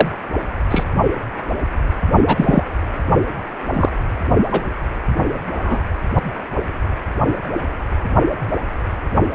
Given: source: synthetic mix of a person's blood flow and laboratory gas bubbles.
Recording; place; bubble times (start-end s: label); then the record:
Doppler ultrasound of blood flow; precordium
0.00-0.08 s: bubbles
0.70-0.83 s: bubbles
2.26-2.63 s: bubbles
3.73-3.89 s: bubbles
4.51-4.61 s: bubbles
5.63-5.78 s: bubbles
From the record:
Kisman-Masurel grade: 123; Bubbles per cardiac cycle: 1 to 2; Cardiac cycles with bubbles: 10 to 50%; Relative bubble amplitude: loud (0.450 to 0.775); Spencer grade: 2 (many but less than half of the cardiac periods contain bubble signals, singularly or in groups); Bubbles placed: only in the low amplitude regions of the cardiac cycle